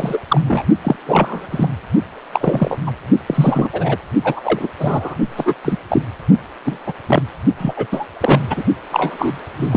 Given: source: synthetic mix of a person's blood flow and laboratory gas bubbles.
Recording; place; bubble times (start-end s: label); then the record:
Doppler ultrasound of blood flow; precordium
0.00-0.18 s: bubbles
0.28-0.40 s: bubbles
0.47-0.64 s: bubbles
0.84-0.96 s: bubbles
1.07-1.47 s: bubbles
1.51-1.68 s: bubbles
2.32-2.79 s: bubbles
2.87-2.92 s: bubbles
3.27-3.70 s: bubbles
3.73-3.97 s: bubbles
4.24-4.68 s: bubbles
4.79-5.15 s: bubbles
5.38-5.55 s: bubbles
5.64-5.76 s: bubbles
5.89-6.05 s: bubbles
6.66-6.78 s: bubbles
6.86-6.93 s: bubbles
7.06-7.22 s: bubbles
7.58-7.74 s: bubbles
7.76-7.87 s: bubbles
7.92-8.06 s: bubbles
8.20-8.63 s: bubbles
8.92-9.38 s: bubbles
9.61-9.77 s: bubbles
From the record:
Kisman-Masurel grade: 243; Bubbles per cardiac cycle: several, 3 to 8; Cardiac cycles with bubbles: 100%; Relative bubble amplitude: loud (0.450 to 0.775); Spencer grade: 3 (all of the cardiac periods contain showers or single bubble signals, but not dominating or overriding the cardiac motion signals); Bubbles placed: only in the low amplitude regions of the cardiac cycle